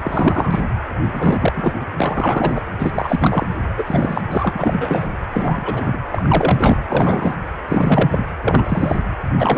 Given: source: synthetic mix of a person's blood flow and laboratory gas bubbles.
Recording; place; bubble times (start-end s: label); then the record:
Doppler ultrasound of blood flow; precordium
0.03-0.60 s: bubbles
1.12-1.52 s: bubbles
1.56-1.73 s: bubbles
1.98-2.61 s: bubbles
2.79-3.46 s: bubbles
3.77-3.84 s: bubbles
3.86-4.22 s: bubbles
4.30-4.53 s: bubbles
4.55-5.07 s: bubbles
5.32-5.98 s: bubbles
6.11-6.77 s: bubbles
6.88-7.37 s: bubbles
7.68-8.24 s: bubbles
8.42-9.00 s: bubbles
9.38-9.58 s: bubbles
From the record:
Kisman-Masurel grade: 343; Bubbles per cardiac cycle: rolling drumbeat, 9 or more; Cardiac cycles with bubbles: 100%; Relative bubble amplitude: loud (0.450 to 0.775); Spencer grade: 3 (all of the cardiac periods contain showers or single bubble signals, but not dominating or overriding the cardiac motion signals); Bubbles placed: anywhere in the cardiac cycle